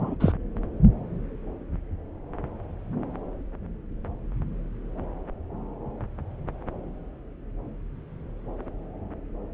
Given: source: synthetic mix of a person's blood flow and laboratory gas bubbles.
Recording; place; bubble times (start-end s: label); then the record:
Doppler ultrasound of blood flow; subclavian vein
0.00-0.16 s: bubbles
0.20-0.33 s: bubbles
From the record:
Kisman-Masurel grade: 122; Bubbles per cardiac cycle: 1 to 2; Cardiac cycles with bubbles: 10 to 50%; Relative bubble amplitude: moderate (0.250 to 0.450); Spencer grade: 2 (many but less than half of the cardiac periods contain bubble signals, singularly or in groups); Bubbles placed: anywhere in the cardiac cycle